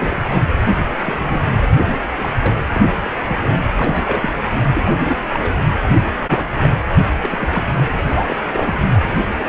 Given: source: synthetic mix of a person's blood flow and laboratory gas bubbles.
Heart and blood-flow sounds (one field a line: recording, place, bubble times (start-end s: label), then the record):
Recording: Doppler ultrasound of blood flow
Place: precordium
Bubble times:
0.00-0.22 s: bubbles
0.30-0.42 s: bubbles
1.05-1.48 s: bubbles
1.59-1.68 s: bubbles
2.17-2.33 s: bubbles
2.40-2.54 s: bubbles
2.68-2.81 s: bubbles
3.04-3.10 s: bubbles
3.27-3.37 s: bubbles
3.42-3.49 s: bubbles
3.76-4.30 s: bubbles
4.73-4.92 s: bubbles
5.08-5.17 s: bubbles
5.29-5.51 s: bubbles
5.83-5.89 s: bubbles
5.99-6.09 s: bubbles
6.29-6.45 s: bubbles
6.62-6.69 s: bubbles
7.21-7.68 s: bubbles
7.93-8.37 s: bubbles
8.45-8.81 s: bubbles
9.08-9.14 s: bubbles
9.39-9.48 s: bubbles
From the record:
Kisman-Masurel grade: 242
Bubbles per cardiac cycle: several, 3 to 8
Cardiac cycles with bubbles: 100%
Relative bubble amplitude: moderate (0.250 to 0.450)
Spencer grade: 3 (all of the cardiac periods contain showers or single bubble signals, but not dominating or overriding the cardiac motion signals)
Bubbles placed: anywhere in the cardiac cycle